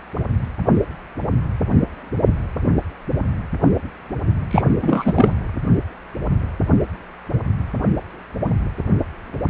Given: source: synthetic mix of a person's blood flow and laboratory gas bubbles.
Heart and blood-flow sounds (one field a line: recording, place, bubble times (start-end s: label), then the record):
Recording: Doppler ultrasound of blood flow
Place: precordium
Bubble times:
4.50-4.62 s: bubbles
4.82-5.38 s: bubbles
From the record:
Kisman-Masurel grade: 213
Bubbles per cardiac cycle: several, 3 to 8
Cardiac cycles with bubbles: 1 to 10%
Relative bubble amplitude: loud (0.450 to 0.775)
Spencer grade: 1 (occasional bubble signal discernible with the cardiac motion signal, with majority of cardiac periods free of bubbles)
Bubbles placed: anywhere in the cardiac cycle